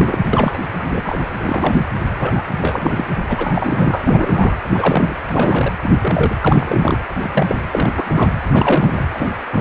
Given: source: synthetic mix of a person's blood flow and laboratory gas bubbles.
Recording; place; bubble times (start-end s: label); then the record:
Doppler ultrasound of blood flow; precordium
0.00-0.18 s: bubbles
0.33-0.60 s: bubbles
0.78-1.19 s: bubbles
1.40-1.76 s: bubbles
2.12-2.45 s: bubbles
2.61-3.06 s: bubbles
3.28-4.03 s: bubbles
4.06-4.54 s: bubbles
4.70-5.16 s: bubbles
5.27-5.73 s: bubbles
5.82-5.99 s: bubbles
6.02-6.34 s: bubbles
6.42-6.98 s: bubbles
7.21-7.56 s: bubbles
7.73-8.33 s: bubbles
8.52-9.06 s: bubbles
9.13-9.29 s: bubbles
9.52-9.61 s: bubbles
From the record:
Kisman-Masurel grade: 242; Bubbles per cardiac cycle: several, 3 to 8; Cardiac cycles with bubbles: 100%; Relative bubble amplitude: moderate (0.250 to 0.450); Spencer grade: 3 (all of the cardiac periods contain showers or single bubble signals, but not dominating or overriding the cardiac motion signals); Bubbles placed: anywhere in the cardiac cycle